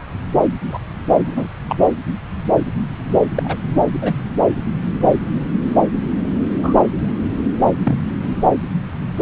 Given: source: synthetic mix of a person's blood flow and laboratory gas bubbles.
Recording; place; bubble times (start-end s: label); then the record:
Doppler ultrasound of blood flow; subclavian vein
0.70-0.78 s: bubbles
1.27-1.49 s: bubbles
1.69-1.76 s: bubbles
3.35-3.57 s: bubbles
4.02-4.15 s: bubbles
6.62-6.74 s: bubbles
7.83-7.97 s: bubbles
8.21-8.28 s: bubbles
From the record:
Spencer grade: 2 (many but less than half of the cardiac periods contain bubble signals, singularly or in groups); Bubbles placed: anywhere in the cardiac cycle